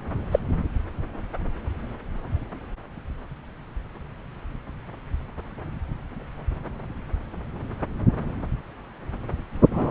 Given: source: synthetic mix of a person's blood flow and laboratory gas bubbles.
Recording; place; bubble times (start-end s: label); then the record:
Doppler ultrasound of blood flow; subclavian vein
0.31-0.39 s: bubbles
9.71-9.91 s: bubbles
From the record:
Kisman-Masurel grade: 223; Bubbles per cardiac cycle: several, 3 to 8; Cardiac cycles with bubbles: 10 to 50%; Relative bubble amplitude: loud (0.450 to 0.775); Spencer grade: 2 (many but less than half of the cardiac periods contain bubble signals, singularly or in groups); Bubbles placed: anywhere in the cardiac cycle